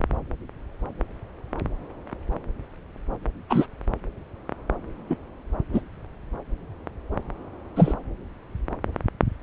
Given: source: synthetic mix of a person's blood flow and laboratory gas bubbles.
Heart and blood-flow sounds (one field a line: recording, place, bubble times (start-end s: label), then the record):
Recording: Doppler ultrasound of blood flow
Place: subclavian vein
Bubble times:
3.49-3.67 s: bubbles
5.10-5.17 s: bubbles
5.73-5.81 s: bubbles
7.75-7.93 s: bubbles
From the record:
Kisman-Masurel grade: 123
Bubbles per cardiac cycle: 1 to 2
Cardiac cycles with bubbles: 10 to 50%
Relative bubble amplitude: loud (0.450 to 0.775)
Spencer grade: 2 (many but less than half of the cardiac periods contain bubble signals, singularly or in groups)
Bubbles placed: anywhere in the cardiac cycle